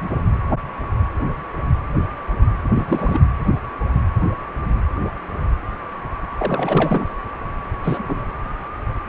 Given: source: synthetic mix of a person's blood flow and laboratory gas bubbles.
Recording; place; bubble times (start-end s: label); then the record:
Doppler ultrasound of blood flow; precordium
2.75-3.19 s: bubbles
6.38-7.08 s: bubbles
7.84-8.04 s: bubbles
8.07-8.25 s: bubbles
9.06-9.09 s: bubbles
From the record:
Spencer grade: 2 (many but less than half of the cardiac periods contain bubble signals, singularly or in groups); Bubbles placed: anywhere in the cardiac cycle